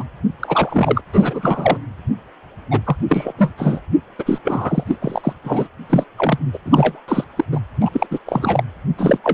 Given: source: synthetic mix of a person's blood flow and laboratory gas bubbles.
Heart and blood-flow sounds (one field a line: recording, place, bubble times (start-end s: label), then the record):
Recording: Doppler ultrasound of blood flow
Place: precordium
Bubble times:
0.00-0.04 s: bubbles
0.40-1.02 s: bubbles
1.12-1.79 s: bubbles
2.71-2.81 s: bubbles
2.85-2.97 s: bubbles
3.08-3.33 s: bubbles
3.38-3.52 s: bubbles
3.57-3.81 s: bubbles
4.18-4.23 s: bubbles
4.26-4.39 s: bubbles
4.44-4.83 s: bubbles
4.86-4.96 s: bubbles
5.01-5.33 s: bubbles
5.43-5.67 s: bubbles
5.89-6.04 s: bubbles
6.17-6.38 s: bubbles
6.53-6.58 s: bubbles
6.65-7.01 s: bubbles
7.08-7.24 s: bubbles
7.36-7.44 s: bubbles
7.51-7.59 s: bubbles
7.80-8.07 s: bubbles
8.11-8.19 s: bubbles
8.26-8.63 s: bubbles
8.98-9.18 s: bubbles
9.24-9.34 s: bubbles
From the record:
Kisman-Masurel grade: 343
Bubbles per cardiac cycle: rolling drumbeat, 9 or more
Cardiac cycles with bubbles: 100%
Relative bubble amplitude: loud (0.450 to 0.775)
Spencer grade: 3 (all of the cardiac periods contain showers or single bubble signals, but not dominating or overriding the cardiac motion signals)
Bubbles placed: anywhere in the cardiac cycle